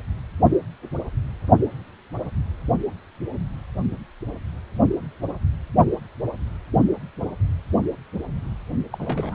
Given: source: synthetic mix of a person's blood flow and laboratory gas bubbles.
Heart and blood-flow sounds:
Doppler ultrasound of blood flow; precordium
8.92-9.35 s: bubbles
From the record:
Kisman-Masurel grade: 211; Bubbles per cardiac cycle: several, 3 to 8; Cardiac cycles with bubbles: 1 to 10%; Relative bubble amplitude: barely perceptible (0.100 to 0.250); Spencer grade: 1 (occasional bubble signal discernible with the cardiac motion signal, with majority of cardiac periods free of bubbles); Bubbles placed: only in the low amplitude regions of the cardiac cycle

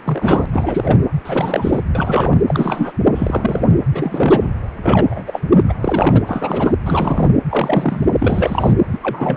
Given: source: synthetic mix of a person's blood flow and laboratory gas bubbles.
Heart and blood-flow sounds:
Doppler ultrasound of blood flow; precordium
0.03-0.46 s: bubbles
0.52-1.02 s: bubbles
1.25-1.81 s: bubbles
1.95-2.38 s: bubbles
2.48-2.92 s: bubbles
3.15-3.78 s: bubbles
3.92-4.50 s: bubbles
4.82-5.06 s: bubbles
5.09-5.39 s: bubbles
5.47-5.62 s: bubbles
5.67-5.75 s: bubbles
5.82-6.21 s: bubbles
6.26-6.72 s: bubbles
6.83-7.29 s: bubbles
7.49-8.09 s: bubbles
8.19-8.73 s: bubbles
8.92-8.99 s: bubbles
9.02-9.37 s: bubbles
From the record:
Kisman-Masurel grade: 343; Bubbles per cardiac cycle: rolling drumbeat, 9 or more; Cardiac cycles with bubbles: 100%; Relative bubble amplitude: loud (0.450 to 0.775); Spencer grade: 3 (all of the cardiac periods contain showers or single bubble signals, but not dominating or overriding the cardiac motion signals); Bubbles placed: anywhere in the cardiac cycle

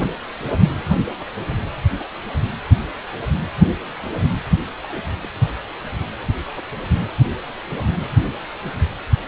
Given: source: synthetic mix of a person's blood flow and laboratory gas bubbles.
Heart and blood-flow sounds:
Doppler ultrasound of blood flow; precordium
4.83-5.02 s: bubbles
5.23-5.27 s: bubbles
From the record:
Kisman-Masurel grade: 111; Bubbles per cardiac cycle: 1 to 2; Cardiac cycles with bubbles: 1 to 10%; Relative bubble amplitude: barely perceptible (0.100 to 0.250); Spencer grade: 1 (occasional bubble signal discernible with the cardiac motion signal, with majority of cardiac periods free of bubbles); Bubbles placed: anywhere in the cardiac cycle

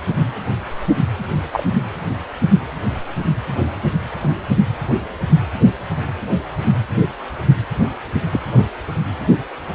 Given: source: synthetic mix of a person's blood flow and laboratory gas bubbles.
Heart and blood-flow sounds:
Doppler ultrasound of blood flow; precordium
1.52-1.64 s: bubbles
8.31-8.40 s: bubbles
8.54-8.63 s: bubbles
From the record:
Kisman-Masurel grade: 122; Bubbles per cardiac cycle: 1 to 2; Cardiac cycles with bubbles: 10 to 50%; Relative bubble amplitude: moderate (0.250 to 0.450); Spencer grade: 2 (many but less than half of the cardiac periods contain bubble signals, singularly or in groups); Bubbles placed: anywhere in the cardiac cycle

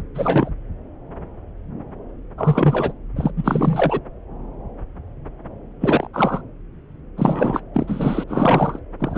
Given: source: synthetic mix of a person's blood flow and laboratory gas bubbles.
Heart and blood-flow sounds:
Doppler ultrasound of blood flow; subclavian vein
0.00-0.02 s: bubbles
0.14-0.49 s: bubbles
2.38-2.93 s: bubbles
3.16-3.31 s: bubbles
3.36-4.00 s: bubbles
5.80-6.07 s: bubbles
6.13-6.42 s: bubbles
7.17-7.60 s: bubbles
7.74-8.24 s: bubbles
8.28-8.79 s: bubbles
8.99-9.18 s: bubbles
From the record:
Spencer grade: 3 (all of the cardiac periods contain showers or single bubble signals, but not dominating or overriding the cardiac motion signals); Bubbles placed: anywhere in the cardiac cycle

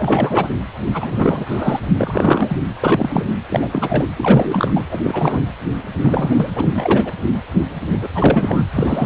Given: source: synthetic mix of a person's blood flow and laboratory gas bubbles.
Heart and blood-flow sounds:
Doppler ultrasound of blood flow; precordium
0.00-0.50 s: bubbles
0.94-1.80 s: bubbles
1.97-2.57 s: bubbles
2.83-3.25 s: bubbles
3.49-4.09 s: bubbles
4.16-4.84 s: bubbles
4.91-5.38 s: bubbles
6.01-6.51 s: bubbles
6.55-6.71 s: bubbles
6.75-7.11 s: bubbles
7.92-8.09 s: bubbles
8.14-8.65 s: bubbles
8.71-9.06 s: bubbles
From the record:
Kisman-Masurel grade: 333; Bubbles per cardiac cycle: rolling drumbeat, 9 or more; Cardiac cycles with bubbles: 50 to 99%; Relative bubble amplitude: loud (0.450 to 0.775); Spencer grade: 3 (all of the cardiac periods contain showers or single bubble signals, but not dominating or overriding the cardiac motion signals); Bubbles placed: anywhere in the cardiac cycle

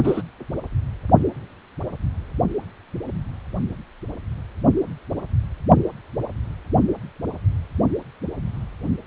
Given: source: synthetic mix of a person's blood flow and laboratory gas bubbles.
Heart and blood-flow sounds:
Doppler ultrasound of blood flow; precordium
0.04-0.22 s: bubbles
From the record:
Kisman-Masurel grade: 112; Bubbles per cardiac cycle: 1 to 2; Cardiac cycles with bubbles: 1 to 10%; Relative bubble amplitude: moderate (0.250 to 0.450); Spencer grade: 1 (occasional bubble signal discernible with the cardiac motion signal, with majority of cardiac periods free of bubbles); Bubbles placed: only in the low amplitude regions of the cardiac cycle

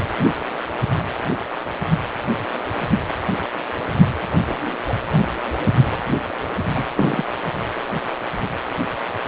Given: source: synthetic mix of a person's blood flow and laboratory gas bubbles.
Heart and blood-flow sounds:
Doppler ultrasound of blood flow; precordium
6.75-6.83 s: bubbles
6.96-7.24 s: bubbles
From the record:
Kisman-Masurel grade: 212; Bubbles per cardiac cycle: several, 3 to 8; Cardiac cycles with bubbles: 1 to 10%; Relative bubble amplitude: moderate (0.250 to 0.450); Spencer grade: 1 (occasional bubble signal discernible with the cardiac motion signal, with majority of cardiac periods free of bubbles); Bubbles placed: anywhere in the cardiac cycle

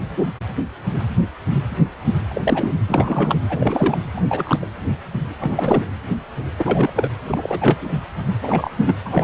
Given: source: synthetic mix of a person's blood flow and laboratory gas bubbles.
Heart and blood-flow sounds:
Doppler ultrasound of blood flow; precordium
2.28-2.41 s: bubbles
2.44-2.73 s: bubbles
2.86-3.40 s: bubbles
3.49-3.96 s: bubbles
4.17-4.22 s: bubbles
4.28-4.66 s: bubbles
5.39-5.84 s: bubbles
6.58-6.90 s: bubbles
6.96-7.08 s: bubbles
7.26-7.77 s: bubbles
8.42-8.71 s: bubbles
8.79-8.94 s: bubbles
9.05-9.24 s: bubbles
From the record:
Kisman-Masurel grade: 332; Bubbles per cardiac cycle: rolling drumbeat, 9 or more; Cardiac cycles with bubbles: 50 to 99%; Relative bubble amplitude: moderate (0.250 to 0.450); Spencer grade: 3 (all of the cardiac periods contain showers or single bubble signals, but not dominating or overriding the cardiac motion signals); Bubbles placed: anywhere in the cardiac cycle

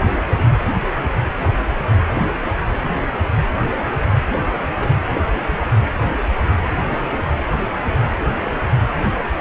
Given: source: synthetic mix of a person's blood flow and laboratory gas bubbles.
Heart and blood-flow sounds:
Doppler ultrasound of blood flow; precordium
0.44-0.51 s: bubbles
2.77-2.92 s: bubbles
3.65-3.69 s: bubbles
3.93-4.07 s: bubbles
4.76-4.96 s: bubbles
6.91-7.07 s: bubbles
8.27-8.40 s: bubbles
8.46-8.50 s: bubbles
8.95-8.99 s: bubbles
From the record:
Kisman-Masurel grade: 121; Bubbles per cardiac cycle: 1 to 2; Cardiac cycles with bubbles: 10 to 50%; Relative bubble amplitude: barely perceptible (0.100 to 0.250); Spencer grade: 2 (many but less than half of the cardiac periods contain bubble signals, singularly or in groups); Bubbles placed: anywhere in the cardiac cycle

